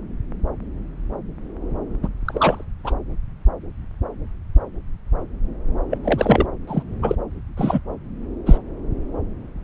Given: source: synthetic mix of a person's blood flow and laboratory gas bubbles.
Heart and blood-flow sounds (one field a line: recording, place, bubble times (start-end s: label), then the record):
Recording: Doppler ultrasound of blood flow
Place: subclavian vein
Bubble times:
2.02-2.08 s: bubbles
2.25-2.65 s: bubbles
2.84-2.94 s: bubbles
5.90-5.98 s: bubbles
6.04-6.46 s: bubbles
6.67-6.82 s: bubbles
7.02-7.15 s: bubbles
7.56-7.80 s: bubbles
8.46-8.58 s: bubbles
From the record:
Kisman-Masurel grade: 223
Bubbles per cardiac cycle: several, 3 to 8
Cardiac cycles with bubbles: 10 to 50%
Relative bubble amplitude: loud (0.450 to 0.775)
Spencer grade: 2 (many but less than half of the cardiac periods contain bubble signals, singularly or in groups)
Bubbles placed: anywhere in the cardiac cycle